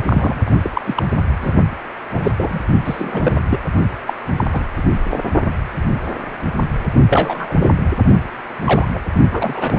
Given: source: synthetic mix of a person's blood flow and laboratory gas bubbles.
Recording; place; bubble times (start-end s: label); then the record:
Doppler ultrasound of blood flow; precordium
0.06-0.40 s: bubbles
0.46-0.51 s: bubbles
0.64-0.70 s: bubbles
0.73-0.81 s: bubbles
0.85-1.03 s: bubbles
1.41-1.55 s: bubbles
2.13-2.31 s: bubbles
2.37-2.60 s: bubbles
2.85-3.40 s: bubbles
3.49-3.59 s: bubbles
4.05-4.13 s: bubbles
4.28-4.33 s: bubbles
4.38-4.45 s: bubbles
4.53-4.65 s: bubbles
4.76-4.82 s: bubbles
5.08-5.20 s: bubbles
7.08-7.54 s: bubbles
7.59-7.68 s: bubbles
8.64-8.87 s: bubbles
8.94-8.99 s: bubbles
9.31-9.79 s: bubbles
From the record:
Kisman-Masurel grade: 232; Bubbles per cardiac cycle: several, 3 to 8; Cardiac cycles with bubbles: 50 to 99%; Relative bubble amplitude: moderate (0.250 to 0.450); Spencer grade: 3 (all of the cardiac periods contain showers or single bubble signals, but not dominating or overriding the cardiac motion signals); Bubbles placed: only in the low amplitude regions of the cardiac cycle